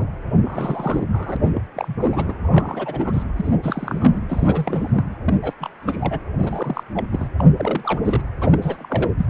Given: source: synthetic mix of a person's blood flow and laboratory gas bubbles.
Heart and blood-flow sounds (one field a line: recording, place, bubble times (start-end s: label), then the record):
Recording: Doppler ultrasound of blood flow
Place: precordium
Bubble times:
0.00-0.11 s: bubbles
0.44-1.06 s: bubbles
1.12-1.37 s: bubbles
1.46-1.52 s: bubbles
1.54-1.62 s: bubbles
1.75-1.94 s: bubbles
1.98-2.34 s: bubbles
2.40-3.23 s: bubbles
3.36-3.57 s: bubbles
3.63-4.20 s: bubbles
4.29-5.04 s: bubbles
5.25-5.34 s: bubbles
5.42-5.54 s: bubbles
5.60-5.70 s: bubbles
5.82-6.19 s: bubbles
6.39-6.83 s: bubbles
6.95-7.06 s: bubbles
7.12-7.28 s: bubbles
7.38-7.44 s: bubbles
7.56-8.00 s: bubbles
8.04-8.22 s: bubbles
8.42-9.10 s: bubbles
9.17-9.26 s: bubbles
From the record:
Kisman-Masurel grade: 342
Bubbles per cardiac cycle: rolling drumbeat, 9 or more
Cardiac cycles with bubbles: 100%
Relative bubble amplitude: moderate (0.250 to 0.450)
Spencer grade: 3 (all of the cardiac periods contain showers or single bubble signals, but not dominating or overriding the cardiac motion signals)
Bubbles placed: anywhere in the cardiac cycle